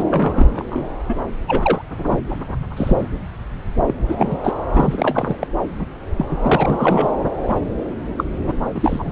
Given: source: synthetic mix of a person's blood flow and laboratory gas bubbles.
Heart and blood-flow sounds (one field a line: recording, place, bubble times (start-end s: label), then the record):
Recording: Doppler ultrasound of blood flow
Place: subclavian vein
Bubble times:
0.00-0.03 s: bubbles
0.11-0.89 s: bubbles
1.08-1.16 s: bubbles
1.48-1.82 s: bubbles
1.97-2.20 s: bubbles
2.76-3.07 s: bubbles
3.85-3.94 s: bubbles
4.08-4.38 s: bubbles
4.44-4.54 s: bubbles
4.73-5.37 s: bubbles
5.40-5.47 s: bubbles
5.79-5.87 s: bubbles
6.17-6.25 s: bubbles
6.29-6.37 s: bubbles
6.44-7.12 s: bubbles
7.43-7.60 s: bubbles
8.18-8.24 s: bubbles
8.44-8.54 s: bubbles
8.74-9.12 s: bubbles
From the record:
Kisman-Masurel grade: 243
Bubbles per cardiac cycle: several, 3 to 8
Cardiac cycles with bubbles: 100%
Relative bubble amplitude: loud (0.450 to 0.775)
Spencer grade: 3 (all of the cardiac periods contain showers or single bubble signals, but not dominating or overriding the cardiac motion signals)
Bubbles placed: anywhere in the cardiac cycle